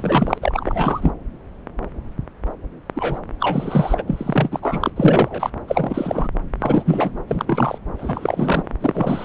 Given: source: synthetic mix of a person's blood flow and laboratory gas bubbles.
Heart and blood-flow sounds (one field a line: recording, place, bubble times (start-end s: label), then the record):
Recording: Doppler ultrasound of blood flow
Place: subclavian vein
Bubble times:
0.00-0.38 s: bubbles
0.41-1.12 s: bubbles
2.94-3.20 s: bubbles
3.40-4.03 s: bubbles
4.08-4.59 s: bubbles
4.62-4.90 s: bubbles
4.96-5.50 s: bubbles
5.67-6.28 s: bubbles
6.60-7.20 s: bubbles
7.27-7.78 s: bubbles
7.98-8.63 s: bubbles
8.81-9.25 s: bubbles
From the record:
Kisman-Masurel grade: 333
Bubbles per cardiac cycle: rolling drumbeat, 9 or more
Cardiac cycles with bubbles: 50 to 99%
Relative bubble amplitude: loud (0.450 to 0.775)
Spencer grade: 3 (all of the cardiac periods contain showers or single bubble signals, but not dominating or overriding the cardiac motion signals)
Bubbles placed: anywhere in the cardiac cycle